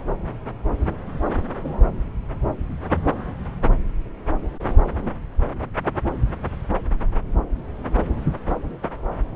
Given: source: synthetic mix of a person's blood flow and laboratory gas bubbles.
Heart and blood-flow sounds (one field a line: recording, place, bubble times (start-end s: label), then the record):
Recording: Doppler ultrasound of blood flow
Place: subclavian vein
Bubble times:
no bubbles
From the record:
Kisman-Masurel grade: 000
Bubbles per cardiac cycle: 0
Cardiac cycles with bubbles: 0%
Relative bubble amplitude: no bubbles discernible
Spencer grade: 0 (complete lack of bubble signals)